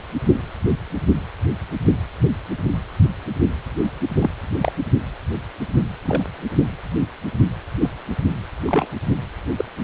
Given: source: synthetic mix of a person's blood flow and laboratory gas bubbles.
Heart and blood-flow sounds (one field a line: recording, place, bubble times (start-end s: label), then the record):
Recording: Doppler ultrasound of blood flow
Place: precordium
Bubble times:
4.20-4.31 s: bubbles
4.62-4.72 s: bubbles
6.04-6.23 s: bubbles
7.79-7.90 s: bubbles
8.67-8.87 s: bubbles
9.57-9.64 s: bubbles
From the record:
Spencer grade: 2 (many but less than half of the cardiac periods contain bubble signals, singularly or in groups)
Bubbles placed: only in the low amplitude regions of the cardiac cycle